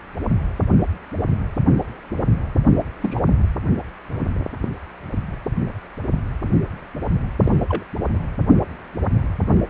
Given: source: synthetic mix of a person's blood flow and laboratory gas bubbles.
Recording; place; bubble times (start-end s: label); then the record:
Doppler ultrasound of blood flow; precordium
3.02-3.21 s: bubbles
7.42-7.55 s: bubbles
7.69-7.84 s: bubbles
From the record:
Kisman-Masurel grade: 122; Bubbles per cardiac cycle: 1 to 2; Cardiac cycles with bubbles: 10 to 50%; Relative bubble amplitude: moderate (0.250 to 0.450); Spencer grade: 2 (many but less than half of the cardiac periods contain bubble signals, singularly or in groups); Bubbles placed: anywhere in the cardiac cycle